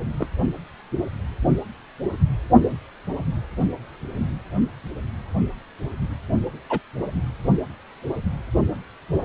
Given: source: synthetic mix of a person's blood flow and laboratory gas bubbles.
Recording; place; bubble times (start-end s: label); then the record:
Doppler ultrasound of blood flow; precordium
0.18-0.27 s: bubbles
6.70-6.81 s: bubbles
From the record:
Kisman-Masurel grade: 122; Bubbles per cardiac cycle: 1 to 2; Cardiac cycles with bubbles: 10 to 50%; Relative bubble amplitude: moderate (0.250 to 0.450); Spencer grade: 2 (many but less than half of the cardiac periods contain bubble signals, singularly or in groups); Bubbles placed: only in the low amplitude regions of the cardiac cycle